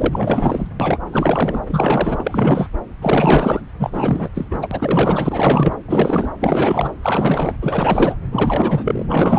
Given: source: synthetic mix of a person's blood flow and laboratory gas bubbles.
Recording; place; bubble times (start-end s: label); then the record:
Doppler ultrasound of blood flow; subclavian vein
0.00-0.68 s: bubbles
0.79-0.99 s: bubbles
1.11-1.61 s: bubbles
1.67-2.68 s: bubbles
3.01-3.61 s: bubbles
3.79-4.29 s: bubbles
4.35-4.67 s: bubbles
4.71-5.79 s: bubbles
5.88-6.31 s: bubbles
6.40-6.92 s: bubbles
7.02-7.54 s: bubbles
7.62-8.15 s: bubbles
8.31-9.04 s: bubbles
9.09-9.39 s: bubbles
From the record:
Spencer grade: 4 (maximum detectable bubble signal sounding continuously throughout systole and diastole of every cardiac period, and overriding the amplitude of the normal cardiac signals); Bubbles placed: anywhere in the cardiac cycle